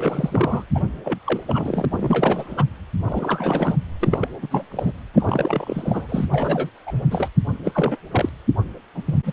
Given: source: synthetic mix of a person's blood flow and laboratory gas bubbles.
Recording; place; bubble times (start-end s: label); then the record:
Doppler ultrasound of blood flow; precordium
0.00-0.65 s: bubbles
0.75-0.84 s: bubbles
1.04-1.19 s: bubbles
1.27-1.42 s: bubbles
1.46-1.86 s: bubbles
1.91-2.64 s: bubbles
3.05-3.76 s: bubbles
4.00-4.29 s: bubbles
4.42-4.48 s: bubbles
4.50-4.65 s: bubbles
4.71-4.92 s: bubbles
5.14-6.25 s: bubbles
6.33-6.70 s: bubbles
6.86-7.03 s: bubbles
7.11-7.29 s: bubbles
7.65-7.72 s: bubbles
7.74-7.97 s: bubbles
8.11-8.29 s: bubbles
8.94-9.04 s: bubbles
9.06-9.20 s: bubbles
9.25-9.32 s: bubbles
From the record:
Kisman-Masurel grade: 342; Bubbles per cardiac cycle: rolling drumbeat, 9 or more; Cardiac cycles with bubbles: 100%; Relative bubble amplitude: moderate (0.250 to 0.450); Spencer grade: 3 (all of the cardiac periods contain showers or single bubble signals, but not dominating or overriding the cardiac motion signals); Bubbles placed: anywhere in the cardiac cycle